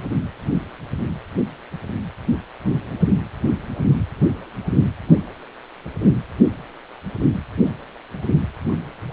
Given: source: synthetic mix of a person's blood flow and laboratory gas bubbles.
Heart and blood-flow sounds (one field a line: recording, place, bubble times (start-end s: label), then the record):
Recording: Doppler ultrasound of blood flow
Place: precordium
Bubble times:
8.66-8.85 s: bubbles
9.10-9.13 s: bubbles
From the record:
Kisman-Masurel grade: 111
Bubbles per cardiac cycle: 1 to 2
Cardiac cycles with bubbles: 1 to 10%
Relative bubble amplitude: barely perceptible (0.100 to 0.250)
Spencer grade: 1 (occasional bubble signal discernible with the cardiac motion signal, with majority of cardiac periods free of bubbles)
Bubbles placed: anywhere in the cardiac cycle